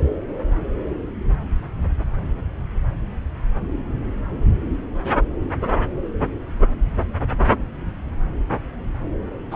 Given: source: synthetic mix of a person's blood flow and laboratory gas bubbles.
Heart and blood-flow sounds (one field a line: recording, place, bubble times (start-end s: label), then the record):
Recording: Doppler ultrasound of blood flow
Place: subclavian vein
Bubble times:
9.51-9.56 s: bubbles
From the record:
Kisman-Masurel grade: 113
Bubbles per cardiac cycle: 1 to 2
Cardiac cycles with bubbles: 1 to 10%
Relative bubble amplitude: loud (0.450 to 0.775)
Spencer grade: 1 (occasional bubble signal discernible with the cardiac motion signal, with majority of cardiac periods free of bubbles)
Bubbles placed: anywhere in the cardiac cycle